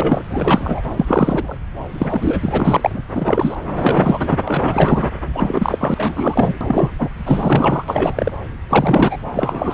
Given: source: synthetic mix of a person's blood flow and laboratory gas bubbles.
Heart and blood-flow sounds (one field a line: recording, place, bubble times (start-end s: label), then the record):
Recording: Doppler ultrasound of blood flow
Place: subclavian vein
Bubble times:
0.00-0.23 s: bubbles
0.30-0.82 s: bubbles
0.96-1.58 s: bubbles
1.98-2.81 s: bubbles
2.83-3.02 s: bubbles
3.14-3.56 s: bubbles
3.76-4.39 s: bubbles
4.47-5.09 s: bubbles
5.33-6.54 s: bubbles
6.60-6.92 s: bubbles
6.99-7.09 s: bubbles
7.25-7.84 s: bubbles
7.88-8.34 s: bubbles
8.69-9.17 s: bubbles
9.36-9.74 s: bubbles
From the record:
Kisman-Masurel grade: 343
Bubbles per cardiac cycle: rolling drumbeat, 9 or more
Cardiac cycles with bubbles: 100%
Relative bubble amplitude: loud (0.450 to 0.775)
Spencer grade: 3 (all of the cardiac periods contain showers or single bubble signals, but not dominating or overriding the cardiac motion signals)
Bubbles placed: anywhere in the cardiac cycle